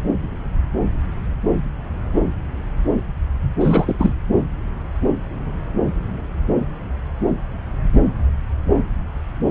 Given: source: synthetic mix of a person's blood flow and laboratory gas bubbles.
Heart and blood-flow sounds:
Doppler ultrasound of blood flow; subclavian vein
3.60-3.96 s: bubbles
3.98-4.15 s: bubbles
From the record:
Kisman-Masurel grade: 212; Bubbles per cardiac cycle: several, 3 to 8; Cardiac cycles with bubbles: 1 to 10%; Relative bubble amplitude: moderate (0.250 to 0.450); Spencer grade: 1 (occasional bubble signal discernible with the cardiac motion signal, with majority of cardiac periods free of bubbles); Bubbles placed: anywhere in the cardiac cycle

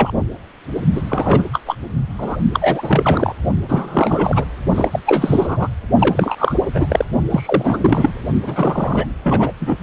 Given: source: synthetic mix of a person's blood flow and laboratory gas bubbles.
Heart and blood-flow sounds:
Doppler ultrasound of blood flow; precordium
0.00-0.11 s: bubbles
0.95-1.01 s: bubbles
1.09-1.45 s: bubbles
1.52-1.60 s: bubbles
1.66-1.75 s: bubbles
2.18-2.37 s: bubbles
2.53-3.33 s: bubbles
3.68-4.45 s: bubbles
4.75-4.88 s: bubbles
4.91-5.00 s: bubbles
5.06-5.67 s: bubbles
5.99-6.36 s: bubbles
6.38-6.55 s: bubbles
6.64-7.07 s: bubbles
7.31-7.78 s: bubbles
7.82-8.12 s: bubbles
8.46-9.06 s: bubbles
9.23-9.53 s: bubbles
9.60-9.76 s: bubbles
From the record:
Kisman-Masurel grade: 343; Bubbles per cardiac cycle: rolling drumbeat, 9 or more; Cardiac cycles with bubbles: 100%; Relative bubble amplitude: loud (0.450 to 0.775); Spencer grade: 3 (all of the cardiac periods contain showers or single bubble signals, but not dominating or overriding the cardiac motion signals); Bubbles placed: only in the low amplitude regions of the cardiac cycle

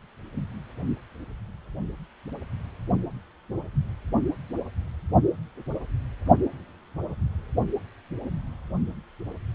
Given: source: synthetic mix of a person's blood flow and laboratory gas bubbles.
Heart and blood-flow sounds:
Doppler ultrasound of blood flow; precordium
no bubbles
From the record:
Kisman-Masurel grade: 000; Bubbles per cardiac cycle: 0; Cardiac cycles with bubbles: 0%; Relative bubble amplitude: no bubbles discernible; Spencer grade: 0 (complete lack of bubble signals)

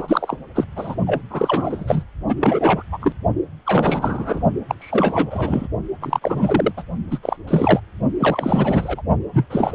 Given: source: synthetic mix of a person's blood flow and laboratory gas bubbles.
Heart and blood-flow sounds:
Doppler ultrasound of blood flow; precordium
0.00-0.37 s: bubbles
0.54-0.65 s: bubbles
0.76-0.95 s: bubbles
1.06-1.22 s: bubbles
1.30-2.03 s: bubbles
2.28-2.35 s: bubbles
2.38-2.82 s: bubbles
2.92-3.15 s: bubbles
3.65-4.41 s: bubbles
4.69-4.75 s: bubbles
4.79-5.68 s: bubbles
6.01-6.19 s: bubbles
6.21-6.73 s: bubbles
6.77-6.83 s: bubbles
7.11-7.19 s: bubbles
7.23-7.37 s: bubbles
7.47-7.80 s: bubbles
8.19-9.02 s: bubbles
9.33-9.46 s: bubbles
9.50-9.75 s: bubbles
From the record:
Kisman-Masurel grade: 343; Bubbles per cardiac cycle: rolling drumbeat, 9 or more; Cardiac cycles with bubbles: 100%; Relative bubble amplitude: loud (0.450 to 0.775); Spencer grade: 3 (all of the cardiac periods contain showers or single bubble signals, but not dominating or overriding the cardiac motion signals); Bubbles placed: only in the low amplitude regions of the cardiac cycle

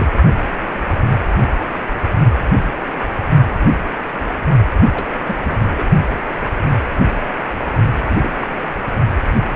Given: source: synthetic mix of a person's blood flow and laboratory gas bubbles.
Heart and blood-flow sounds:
Doppler ultrasound of blood flow; precordium
0.00-0.07 s: bubbles
4.80-5.07 s: bubbles
5.25-5.36 s: bubbles
5.42-5.68 s: bubbles
5.78-5.85 s: bubbles
8.02-8.16 s: bubbles
8.21-8.30 s: bubbles
8.39-8.47 s: bubbles
From the record:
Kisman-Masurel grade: 221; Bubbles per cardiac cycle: several, 3 to 8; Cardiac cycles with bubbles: 10 to 50%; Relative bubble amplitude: barely perceptible (0.100 to 0.250); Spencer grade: 2 (many but less than half of the cardiac periods contain bubble signals, singularly or in groups); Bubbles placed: only in the low amplitude regions of the cardiac cycle

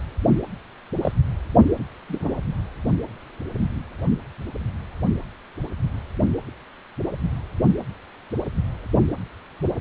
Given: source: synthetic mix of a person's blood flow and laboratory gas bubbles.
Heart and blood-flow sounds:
Doppler ultrasound of blood flow; precordium
1.02-1.12 s: bubbles
2.08-2.35 s: bubbles
From the record:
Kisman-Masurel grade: 122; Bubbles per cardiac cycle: 1 to 2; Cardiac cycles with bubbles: 10 to 50%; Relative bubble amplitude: moderate (0.250 to 0.450); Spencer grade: 2 (many but less than half of the cardiac periods contain bubble signals, singularly or in groups); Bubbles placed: only in the low amplitude regions of the cardiac cycle

